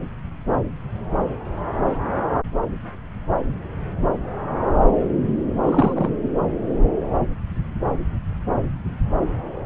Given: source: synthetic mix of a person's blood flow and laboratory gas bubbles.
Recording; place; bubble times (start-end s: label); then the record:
Doppler ultrasound of blood flow; subclavian vein
5.66-6.10 s: bubbles
From the record:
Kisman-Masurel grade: 212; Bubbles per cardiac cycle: several, 3 to 8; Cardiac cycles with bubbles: 1 to 10%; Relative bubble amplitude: moderate (0.250 to 0.450); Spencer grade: 1 (occasional bubble signal discernible with the cardiac motion signal, with majority of cardiac periods free of bubbles); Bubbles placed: anywhere in the cardiac cycle